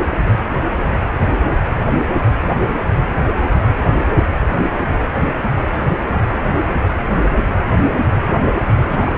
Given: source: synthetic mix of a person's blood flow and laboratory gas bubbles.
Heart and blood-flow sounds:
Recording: Doppler ultrasound of blood flow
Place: precordium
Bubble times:
8.82-8.87 s: bubbles
8.89-9.17 s: bubbles
From the record:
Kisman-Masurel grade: 211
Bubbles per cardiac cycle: several, 3 to 8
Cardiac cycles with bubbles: 1 to 10%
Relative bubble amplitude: barely perceptible (0.100 to 0.250)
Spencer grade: 1 (occasional bubble signal discernible with the cardiac motion signal, with majority of cardiac periods free of bubbles)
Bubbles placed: anywhere in the cardiac cycle

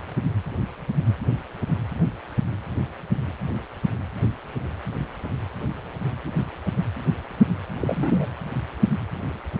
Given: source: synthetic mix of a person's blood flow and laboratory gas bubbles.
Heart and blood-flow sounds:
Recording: Doppler ultrasound of blood flow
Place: precordium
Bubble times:
7.82-8.26 s: bubbles
From the record:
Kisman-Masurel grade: 211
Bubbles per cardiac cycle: several, 3 to 8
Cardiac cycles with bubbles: 1 to 10%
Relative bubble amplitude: barely perceptible (0.100 to 0.250)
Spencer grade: 1 (occasional bubble signal discernible with the cardiac motion signal, with majority of cardiac periods free of bubbles)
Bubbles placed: anywhere in the cardiac cycle

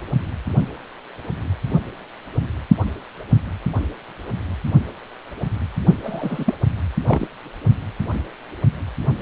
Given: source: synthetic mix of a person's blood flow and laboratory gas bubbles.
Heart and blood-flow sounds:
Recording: Doppler ultrasound of blood flow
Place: precordium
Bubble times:
6.03-6.54 s: bubbles
7.06-7.27 s: bubbles
From the record:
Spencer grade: 1 (occasional bubble signal discernible with the cardiac motion signal, with majority of cardiac periods free of bubbles)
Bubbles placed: only in the low amplitude regions of the cardiac cycle

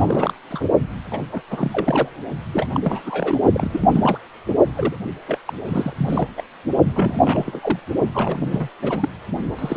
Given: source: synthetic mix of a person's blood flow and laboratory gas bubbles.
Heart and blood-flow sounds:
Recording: Doppler ultrasound of blood flow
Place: precordium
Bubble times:
0.00-0.33 s: bubbles
0.50-0.65 s: bubbles
1.10-1.22 s: bubbles
1.31-1.42 s: bubbles
1.50-2.09 s: bubbles
2.53-2.68 s: bubbles
2.73-2.80 s: bubbles
2.85-3.40 s: bubbles
3.53-3.88 s: bubbles
3.92-4.18 s: bubbles
4.76-4.96 s: bubbles
5.27-5.38 s: bubbles
5.46-5.53 s: bubbles
5.65-6.28 s: bubbles
6.37-6.42 s: bubbles
6.95-7.20 s: bubbles
7.25-7.79 s: bubbles
8.13-8.69 s: bubbles
8.81-9.09 s: bubbles
9.59-9.77 s: bubbles
From the record:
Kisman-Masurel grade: 342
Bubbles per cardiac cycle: rolling drumbeat, 9 or more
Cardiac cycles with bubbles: 100%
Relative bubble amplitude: moderate (0.250 to 0.450)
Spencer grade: 3 (all of the cardiac periods contain showers or single bubble signals, but not dominating or overriding the cardiac motion signals)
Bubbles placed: only in the low amplitude regions of the cardiac cycle

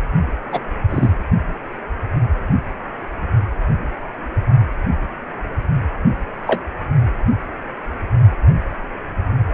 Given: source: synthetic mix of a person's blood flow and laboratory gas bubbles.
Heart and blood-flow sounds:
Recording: Doppler ultrasound of blood flow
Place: precordium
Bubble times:
0.52-0.61 s: bubbles
0.89-1.15 s: bubbles
6.46-6.62 s: bubbles
From the record:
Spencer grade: 2 (many but less than half of the cardiac periods contain bubble signals, singularly or in groups)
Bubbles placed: only in the low amplitude regions of the cardiac cycle

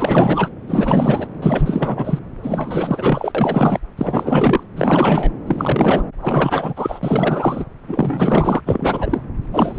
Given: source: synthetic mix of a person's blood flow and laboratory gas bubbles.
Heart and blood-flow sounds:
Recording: Doppler ultrasound of blood flow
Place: subclavian vein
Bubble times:
0.00-0.48 s: bubbles
0.67-1.27 s: bubbles
1.42-2.19 s: bubbles
2.42-3.32 s: bubbles
3.34-3.80 s: bubbles
3.97-4.63 s: bubbles
4.75-5.32 s: bubbles
5.46-6.03 s: bubbles
6.21-7.00 s: bubbles
7.03-7.64 s: bubbles
7.88-8.61 s: bubbles
8.65-9.22 s: bubbles
9.53-9.79 s: bubbles
From the record:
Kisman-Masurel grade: 444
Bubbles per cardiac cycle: continuous sound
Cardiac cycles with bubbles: 100%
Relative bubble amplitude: maximal (0.775 to 0.999)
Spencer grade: 4 (maximum detectable bubble signal sounding continuously throughout systole and diastole of every cardiac period, and overriding the amplitude of the normal cardiac signals)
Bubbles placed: anywhere in the cardiac cycle

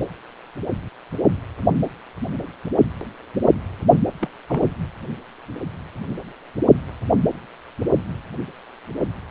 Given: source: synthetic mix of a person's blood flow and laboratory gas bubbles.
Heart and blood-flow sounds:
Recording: Doppler ultrasound of blood flow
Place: precordium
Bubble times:
4.21-4.30 s: bubbles
4.47-4.67 s: bubbles
From the record:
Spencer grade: 1 (occasional bubble signal discernible with the cardiac motion signal, with majority of cardiac periods free of bubbles)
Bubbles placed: only in the low amplitude regions of the cardiac cycle

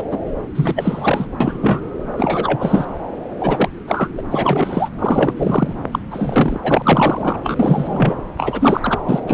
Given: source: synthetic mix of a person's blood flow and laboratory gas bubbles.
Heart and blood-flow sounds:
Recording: Doppler ultrasound of blood flow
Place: subclavian vein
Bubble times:
0.10-0.18 s: bubbles
0.55-1.26 s: bubbles
1.40-1.58 s: bubbles
1.61-1.82 s: bubbles
2.17-2.85 s: bubbles
3.40-3.69 s: bubbles
3.88-4.09 s: bubbles
4.17-4.21 s: bubbles
4.30-4.89 s: bubbles
4.99-5.33 s: bubbles
5.36-5.74 s: bubbles
5.92-5.99 s: bubbles
6.11-6.59 s: bubbles
6.62-7.41 s: bubbles
7.44-8.16 s: bubbles
8.38-8.99 s: bubbles
9.05-9.20 s: bubbles
9.27-9.34 s: bubbles
From the record:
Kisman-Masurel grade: 343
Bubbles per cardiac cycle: rolling drumbeat, 9 or more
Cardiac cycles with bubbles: 100%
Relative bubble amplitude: loud (0.450 to 0.775)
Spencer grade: 3 (all of the cardiac periods contain showers or single bubble signals, but not dominating or overriding the cardiac motion signals)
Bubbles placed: anywhere in the cardiac cycle

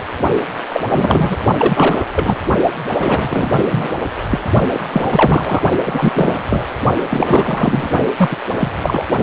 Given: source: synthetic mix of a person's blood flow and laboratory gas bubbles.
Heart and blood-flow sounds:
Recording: Doppler ultrasound of blood flow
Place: precordium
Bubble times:
0.72-0.81 s: bubbles
0.89-1.36 s: bubbles
1.57-2.05 s: bubbles
2.15-2.36 s: bubbles
2.99-3.50 s: bubbles
3.52-3.66 s: bubbles
3.71-3.96 s: bubbles
4.29-4.39 s: bubbles
4.73-4.80 s: bubbles
4.92-5.63 s: bubbles
5.85-6.42 s: bubbles
6.50-6.66 s: bubbles
7.10-7.90 s: bubbles
8.17-8.37 s: bubbles
8.52-8.71 s: bubbles
8.83-9.06 s: bubbles
From the record:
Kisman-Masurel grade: 343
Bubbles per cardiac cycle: rolling drumbeat, 9 or more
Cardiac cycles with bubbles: 100%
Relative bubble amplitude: loud (0.450 to 0.775)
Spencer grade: 3 (all of the cardiac periods contain showers or single bubble signals, but not dominating or overriding the cardiac motion signals)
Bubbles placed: only in the low amplitude regions of the cardiac cycle

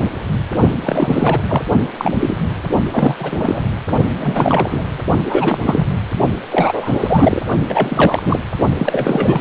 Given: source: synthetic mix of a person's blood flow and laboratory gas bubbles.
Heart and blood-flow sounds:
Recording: Doppler ultrasound of blood flow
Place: precordium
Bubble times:
0.83-1.42 s: bubbles
1.48-1.62 s: bubbles
1.98-2.41 s: bubbles
2.91-3.62 s: bubbles
4.19-4.84 s: bubbles
5.25-5.58 s: bubbles
5.65-5.99 s: bubbles
6.51-7.42 s: bubbles
7.69-8.39 s: bubbles
8.78-9.41 s: bubbles
From the record:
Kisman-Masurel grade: 333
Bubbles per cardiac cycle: rolling drumbeat, 9 or more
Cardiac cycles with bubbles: 50 to 99%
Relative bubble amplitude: loud (0.450 to 0.775)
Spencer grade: 3 (all of the cardiac periods contain showers or single bubble signals, but not dominating or overriding the cardiac motion signals)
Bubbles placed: only in the low amplitude regions of the cardiac cycle

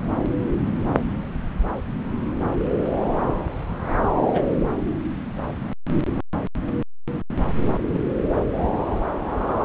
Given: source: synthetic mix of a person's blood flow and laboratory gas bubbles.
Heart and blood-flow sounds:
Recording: Doppler ultrasound of blood flow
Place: subclavian vein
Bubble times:
4.33-4.42 s: bubbles
7.71-8.00 s: bubbles
From the record:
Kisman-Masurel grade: 121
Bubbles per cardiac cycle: 1 to 2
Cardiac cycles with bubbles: 10 to 50%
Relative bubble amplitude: barely perceptible (0.100 to 0.250)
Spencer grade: 2 (many but less than half of the cardiac periods contain bubble signals, singularly or in groups)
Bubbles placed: anywhere in the cardiac cycle

